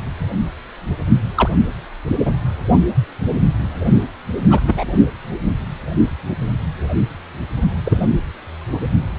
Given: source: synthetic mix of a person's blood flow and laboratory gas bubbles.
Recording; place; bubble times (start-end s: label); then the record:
Doppler ultrasound of blood flow; precordium
1.36-1.50 s: bubbles
2.25-2.33 s: bubbles
4.50-4.61 s: bubbles
4.67-4.84 s: bubbles
7.84-8.07 s: bubbles
From the record:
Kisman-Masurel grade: 123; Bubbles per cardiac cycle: 1 to 2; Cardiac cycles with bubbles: 10 to 50%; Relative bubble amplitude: loud (0.450 to 0.775); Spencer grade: 2 (many but less than half of the cardiac periods contain bubble signals, singularly or in groups); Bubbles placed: only in the low amplitude regions of the cardiac cycle